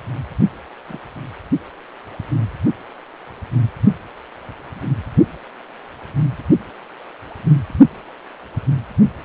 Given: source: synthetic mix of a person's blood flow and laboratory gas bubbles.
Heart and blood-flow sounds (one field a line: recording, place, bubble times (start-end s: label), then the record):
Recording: Doppler ultrasound of blood flow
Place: precordium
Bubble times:
0.89-0.99 s: bubbles
From the record:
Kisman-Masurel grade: 111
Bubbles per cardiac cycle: 1 to 2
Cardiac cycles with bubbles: 1 to 10%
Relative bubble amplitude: barely perceptible (0.100 to 0.250)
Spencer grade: 1 (occasional bubble signal discernible with the cardiac motion signal, with majority of cardiac periods free of bubbles)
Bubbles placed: only in the low amplitude regions of the cardiac cycle